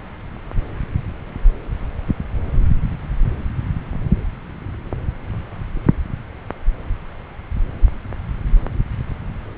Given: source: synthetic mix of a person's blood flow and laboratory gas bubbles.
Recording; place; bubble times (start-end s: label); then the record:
Doppler ultrasound of blood flow; subclavian vein
no bubbles
From the record:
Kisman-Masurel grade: 000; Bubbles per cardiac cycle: 0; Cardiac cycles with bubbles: 0%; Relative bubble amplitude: no bubbles discernible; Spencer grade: 0 (complete lack of bubble signals)